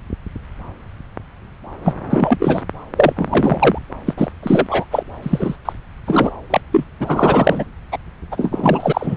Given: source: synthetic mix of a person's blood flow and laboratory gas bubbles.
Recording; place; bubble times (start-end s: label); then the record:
Doppler ultrasound of blood flow; subclavian vein
1.84-1.93 s: bubbles
2.09-2.62 s: bubbles
2.96-3.13 s: bubbles
3.16-3.79 s: bubbles
4.06-4.13 s: bubbles
4.17-4.31 s: bubbles
4.42-4.85 s: bubbles
4.90-5.03 s: bubbles
5.22-5.56 s: bubbles
5.65-5.72 s: bubbles
6.06-6.32 s: bubbles
6.50-6.60 s: bubbles
6.72-6.84 s: bubbles
7.00-7.65 s: bubbles
7.91-7.97 s: bubbles
8.31-9.17 s: bubbles
From the record:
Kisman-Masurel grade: 333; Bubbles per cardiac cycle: rolling drumbeat, 9 or more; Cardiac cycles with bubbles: 50 to 99%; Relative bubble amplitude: loud (0.450 to 0.775); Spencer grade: 3 (all of the cardiac periods contain showers or single bubble signals, but not dominating or overriding the cardiac motion signals); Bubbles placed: anywhere in the cardiac cycle